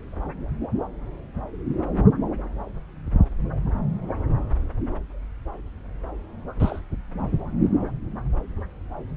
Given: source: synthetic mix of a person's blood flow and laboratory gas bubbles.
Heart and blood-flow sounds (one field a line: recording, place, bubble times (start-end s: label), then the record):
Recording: Doppler ultrasound of blood flow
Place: subclavian vein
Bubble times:
6.59-6.79 s: bubbles
From the record:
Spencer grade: 1 (occasional bubble signal discernible with the cardiac motion signal, with majority of cardiac periods free of bubbles)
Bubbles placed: anywhere in the cardiac cycle